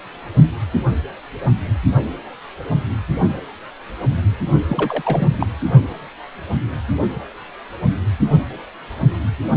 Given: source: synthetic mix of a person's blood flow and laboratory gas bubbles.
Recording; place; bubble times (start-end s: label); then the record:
Doppler ultrasound of blood flow; precordium
4.69-5.28 s: bubbles
5.38-5.46 s: bubbles
From the record:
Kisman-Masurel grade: 222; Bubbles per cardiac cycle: several, 3 to 8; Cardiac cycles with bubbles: 10 to 50%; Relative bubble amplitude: moderate (0.250 to 0.450); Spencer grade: 2 (many but less than half of the cardiac periods contain bubble signals, singularly or in groups); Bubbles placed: only in the low amplitude regions of the cardiac cycle